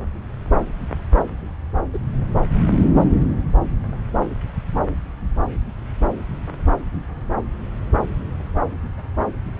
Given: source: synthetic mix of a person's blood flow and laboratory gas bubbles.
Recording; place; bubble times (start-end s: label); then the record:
Doppler ultrasound of blood flow; subclavian vein
1.93-1.98 s: bubbles
From the record:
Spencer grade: 2 (many but less than half of the cardiac periods contain bubble signals, singularly or in groups); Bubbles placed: anywhere in the cardiac cycle